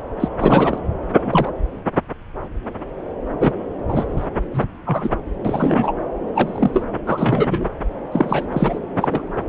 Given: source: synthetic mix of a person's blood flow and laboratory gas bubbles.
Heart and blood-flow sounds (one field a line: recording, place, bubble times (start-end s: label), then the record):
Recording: Doppler ultrasound of blood flow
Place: subclavian vein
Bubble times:
0.19-0.28 s: bubbles
0.38-0.78 s: bubbles
1.17-1.50 s: bubbles
3.40-3.52 s: bubbles
3.89-4.26 s: bubbles
4.54-4.65 s: bubbles
4.86-5.10 s: bubbles
5.45-5.92 s: bubbles
6.35-6.83 s: bubbles
7.06-7.69 s: bubbles
8.12-8.46 s: bubbles
8.51-8.79 s: bubbles
8.96-9.08 s: bubbles
9.11-9.24 s: bubbles
From the record:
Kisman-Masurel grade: 233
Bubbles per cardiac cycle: several, 3 to 8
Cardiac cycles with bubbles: 50 to 99%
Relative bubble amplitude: loud (0.450 to 0.775)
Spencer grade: 3 (all of the cardiac periods contain showers or single bubble signals, but not dominating or overriding the cardiac motion signals)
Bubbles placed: anywhere in the cardiac cycle